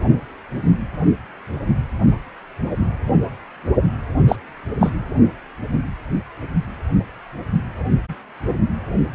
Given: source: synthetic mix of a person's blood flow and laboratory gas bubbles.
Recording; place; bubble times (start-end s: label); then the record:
Doppler ultrasound of blood flow; precordium
4.28-4.36 s: bubbles
4.80-4.90 s: bubbles
From the record:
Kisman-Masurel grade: 113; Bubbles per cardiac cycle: 1 to 2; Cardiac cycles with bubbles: 1 to 10%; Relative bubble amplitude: loud (0.450 to 0.775); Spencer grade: 1 (occasional bubble signal discernible with the cardiac motion signal, with majority of cardiac periods free of bubbles); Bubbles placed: anywhere in the cardiac cycle